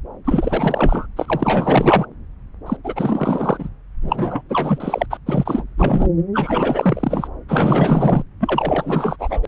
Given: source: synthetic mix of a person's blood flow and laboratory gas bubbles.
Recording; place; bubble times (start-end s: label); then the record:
Doppler ultrasound of blood flow; subclavian vein
0.24-1.06 s: bubbles
1.16-2.06 s: bubbles
2.66-2.77 s: bubbles
2.83-3.69 s: bubbles
4.02-4.43 s: bubbles
4.49-5.06 s: bubbles
5.10-5.18 s: bubbles
5.26-5.64 s: bubbles
5.77-6.08 s: bubbles
6.33-7.28 s: bubbles
7.49-8.23 s: bubbles
8.40-9.16 s: bubbles
9.19-9.40 s: bubbles
9.42-9.48 s: bubbles
From the record:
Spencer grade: 4 (maximum detectable bubble signal sounding continuously throughout systole and diastole of every cardiac period, and overriding the amplitude of the normal cardiac signals); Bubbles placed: anywhere in the cardiac cycle